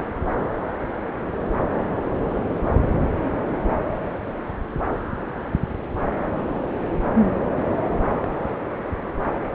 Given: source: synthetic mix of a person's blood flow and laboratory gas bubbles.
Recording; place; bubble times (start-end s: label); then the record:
Doppler ultrasound of blood flow; subclavian vein
no bubbles
From the record:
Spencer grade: 0 (complete lack of bubble signals)